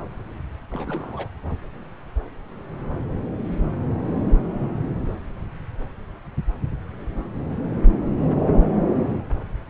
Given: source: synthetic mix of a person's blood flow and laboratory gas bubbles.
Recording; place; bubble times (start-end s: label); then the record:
Doppler ultrasound of blood flow; subclavian vein
0.70-1.28 s: bubbles
From the record:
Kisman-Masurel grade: 211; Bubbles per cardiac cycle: several, 3 to 8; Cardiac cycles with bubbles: 1 to 10%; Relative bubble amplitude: barely perceptible (0.100 to 0.250); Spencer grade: 1 (occasional bubble signal discernible with the cardiac motion signal, with majority of cardiac periods free of bubbles); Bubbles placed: anywhere in the cardiac cycle